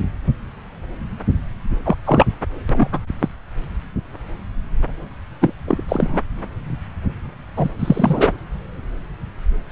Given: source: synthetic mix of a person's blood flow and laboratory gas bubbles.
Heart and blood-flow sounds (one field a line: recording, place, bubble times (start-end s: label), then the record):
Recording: Doppler ultrasound of blood flow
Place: subclavian vein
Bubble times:
1.85-1.96 s: bubbles
2.04-2.26 s: bubbles
2.69-2.88 s: bubbles
2.92-3.00 s: bubbles
3.20-3.28 s: bubbles
5.41-5.54 s: bubbles
5.67-5.83 s: bubbles
5.88-6.20 s: bubbles
7.56-7.68 s: bubbles
7.79-8.32 s: bubbles
From the record:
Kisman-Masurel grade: 233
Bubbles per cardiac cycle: several, 3 to 8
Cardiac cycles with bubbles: 50 to 99%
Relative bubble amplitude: loud (0.450 to 0.775)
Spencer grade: 3 (all of the cardiac periods contain showers or single bubble signals, but not dominating or overriding the cardiac motion signals)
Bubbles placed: anywhere in the cardiac cycle